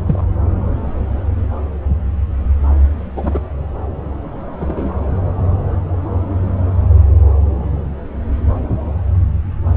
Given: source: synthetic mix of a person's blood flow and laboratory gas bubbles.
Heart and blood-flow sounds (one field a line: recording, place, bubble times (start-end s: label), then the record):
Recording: Doppler ultrasound of blood flow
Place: subclavian vein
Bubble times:
0.06-0.24 s: bubbles
3.15-3.40 s: bubbles
4.60-4.90 s: bubbles
From the record:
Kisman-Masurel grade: 122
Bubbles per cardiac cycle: 1 to 2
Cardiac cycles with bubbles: 10 to 50%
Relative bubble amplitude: moderate (0.250 to 0.450)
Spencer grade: 2 (many but less than half of the cardiac periods contain bubble signals, singularly or in groups)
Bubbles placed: anywhere in the cardiac cycle